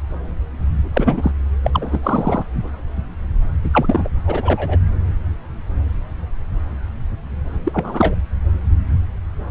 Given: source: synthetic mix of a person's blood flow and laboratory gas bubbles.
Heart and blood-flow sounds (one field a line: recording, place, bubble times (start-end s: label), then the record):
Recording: Doppler ultrasound of blood flow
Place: subclavian vein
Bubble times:
0.93-1.31 s: bubbles
1.64-2.00 s: bubbles
2.03-2.44 s: bubbles
3.65-3.70 s: bubbles
3.72-4.08 s: bubbles
4.26-4.79 s: bubbles
7.64-8.14 s: bubbles
From the record:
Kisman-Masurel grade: 223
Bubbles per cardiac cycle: several, 3 to 8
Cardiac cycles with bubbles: 10 to 50%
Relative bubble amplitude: loud (0.450 to 0.775)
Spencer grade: 2 (many but less than half of the cardiac periods contain bubble signals, singularly or in groups)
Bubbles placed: anywhere in the cardiac cycle